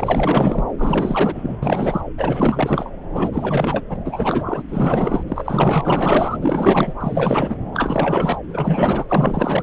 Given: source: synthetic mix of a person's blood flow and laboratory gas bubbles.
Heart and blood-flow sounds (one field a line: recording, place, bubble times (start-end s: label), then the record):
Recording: Doppler ultrasound of blood flow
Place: subclavian vein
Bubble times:
0.00-0.64 s: bubbles
0.77-1.57 s: bubbles
1.62-2.01 s: bubbles
2.17-2.91 s: bubbles
3.13-3.29 s: bubbles
3.32-3.85 s: bubbles
3.89-3.96 s: bubbles
4.04-4.63 s: bubbles
4.68-5.23 s: bubbles
5.27-6.38 s: bubbles
6.41-6.93 s: bubbles
7.00-7.55 s: bubbles
7.73-8.37 s: bubbles
8.48-9.05 s: bubbles
9.09-9.63 s: bubbles
From the record:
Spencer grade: 4 (maximum detectable bubble signal sounding continuously throughout systole and diastole of every cardiac period, and overriding the amplitude of the normal cardiac signals)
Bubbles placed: anywhere in the cardiac cycle